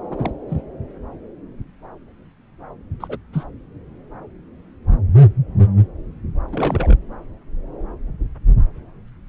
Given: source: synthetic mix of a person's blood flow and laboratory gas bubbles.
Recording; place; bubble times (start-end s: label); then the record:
Doppler ultrasound of blood flow; subclavian vein
0.10-0.32 s: bubbles
0.48-0.60 s: bubbles
3.00-3.18 s: bubbles
3.33-3.44 s: bubbles
6.47-6.95 s: bubbles
From the record:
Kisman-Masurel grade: 221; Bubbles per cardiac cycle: several, 3 to 8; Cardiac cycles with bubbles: 10 to 50%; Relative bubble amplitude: barely perceptible (0.100 to 0.250); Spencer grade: 2 (many but less than half of the cardiac periods contain bubble signals, singularly or in groups); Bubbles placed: anywhere in the cardiac cycle